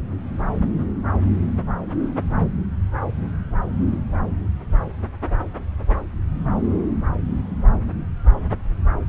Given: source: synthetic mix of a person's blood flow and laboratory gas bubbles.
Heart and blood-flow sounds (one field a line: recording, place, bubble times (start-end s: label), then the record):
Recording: Doppler ultrasound of blood flow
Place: subclavian vein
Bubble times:
no bubbles
From the record:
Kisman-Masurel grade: 000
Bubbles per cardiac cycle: 0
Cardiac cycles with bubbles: 0%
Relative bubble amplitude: no bubbles discernible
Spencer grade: 0 (complete lack of bubble signals)